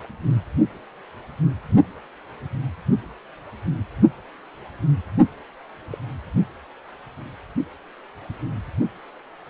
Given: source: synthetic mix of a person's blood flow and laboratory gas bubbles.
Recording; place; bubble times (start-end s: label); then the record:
Doppler ultrasound of blood flow; precordium
5.91-5.98 s: bubbles
From the record:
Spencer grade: 2 (many but less than half of the cardiac periods contain bubble signals, singularly or in groups); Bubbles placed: only in the low amplitude regions of the cardiac cycle